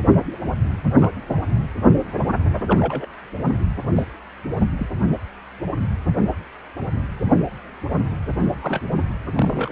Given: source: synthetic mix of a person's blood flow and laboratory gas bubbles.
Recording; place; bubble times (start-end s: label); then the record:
Doppler ultrasound of blood flow; precordium
0.94-1.12 s: bubbles
2.67-3.11 s: bubbles
3.96-4.02 s: bubbles
4.78-4.87 s: bubbles
8.43-8.81 s: bubbles
9.35-9.72 s: bubbles
From the record:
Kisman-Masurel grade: 121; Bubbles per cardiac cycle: 1 to 2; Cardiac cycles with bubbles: 10 to 50%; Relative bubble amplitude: barely perceptible (0.100 to 0.250); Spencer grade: 2 (many but less than half of the cardiac periods contain bubble signals, singularly or in groups); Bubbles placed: anywhere in the cardiac cycle